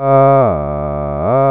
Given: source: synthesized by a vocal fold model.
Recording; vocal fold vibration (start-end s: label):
sustained vowel that changes in the middle
0.00-0.38 s: 135.7 Hz, open quotient 0.58
0.58-1.18 s: 73.4 Hz, open quotient 0.38
1.38-1.51 s: 135.7 Hz, open quotient 0.58